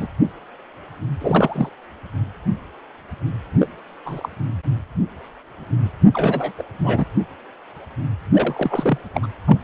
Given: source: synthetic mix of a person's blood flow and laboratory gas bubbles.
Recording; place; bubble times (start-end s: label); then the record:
Doppler ultrasound of blood flow; precordium
0.00-0.08 s: bubbles
1.21-1.70 s: bubbles
3.60-3.67 s: bubbles
4.05-4.29 s: bubbles
6.13-6.52 s: bubbles
6.58-6.64 s: bubbles
6.79-7.04 s: bubbles
8.33-8.99 s: bubbles
9.14-9.27 s: bubbles
9.47-9.58 s: bubbles
From the record:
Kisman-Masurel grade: 232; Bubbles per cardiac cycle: several, 3 to 8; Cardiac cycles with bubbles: 50 to 99%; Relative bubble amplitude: moderate (0.250 to 0.450); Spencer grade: 3 (all of the cardiac periods contain showers or single bubble signals, but not dominating or overriding the cardiac motion signals); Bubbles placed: anywhere in the cardiac cycle